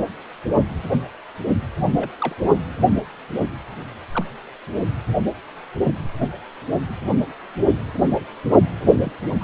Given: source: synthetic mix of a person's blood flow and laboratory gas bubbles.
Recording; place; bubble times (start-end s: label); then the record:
Doppler ultrasound of blood flow; precordium
1.96-2.11 s: bubbles
2.20-2.35 s: bubbles
4.12-4.25 s: bubbles
9.02-9.12 s: bubbles
9.41-9.44 s: bubbles
From the record:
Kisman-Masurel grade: 121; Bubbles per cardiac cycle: 1 to 2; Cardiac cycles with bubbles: 10 to 50%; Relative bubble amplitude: barely perceptible (0.100 to 0.250); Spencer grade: 2 (many but less than half of the cardiac periods contain bubble signals, singularly or in groups); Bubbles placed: only in the low amplitude regions of the cardiac cycle